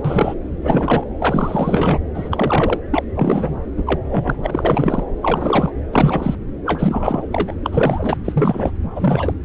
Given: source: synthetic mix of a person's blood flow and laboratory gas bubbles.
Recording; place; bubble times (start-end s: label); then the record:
Doppler ultrasound of blood flow; subclavian vein
0.04-0.35 s: bubbles
0.63-1.04 s: bubbles
1.19-1.99 s: bubbles
2.15-2.78 s: bubbles
2.92-3.04 s: bubbles
3.15-3.58 s: bubbles
3.77-3.99 s: bubbles
4.09-5.04 s: bubbles
5.22-5.73 s: bubbles
5.94-6.35 s: bubbles
6.66-7.56 s: bubbles
7.64-8.17 s: bubbles
8.25-8.71 s: bubbles
8.96-9.34 s: bubbles
From the record:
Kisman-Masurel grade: 342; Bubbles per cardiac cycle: rolling drumbeat, 9 or more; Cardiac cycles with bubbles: 100%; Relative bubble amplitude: moderate (0.250 to 0.450); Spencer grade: 3 (all of the cardiac periods contain showers or single bubble signals, but not dominating or overriding the cardiac motion signals); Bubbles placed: anywhere in the cardiac cycle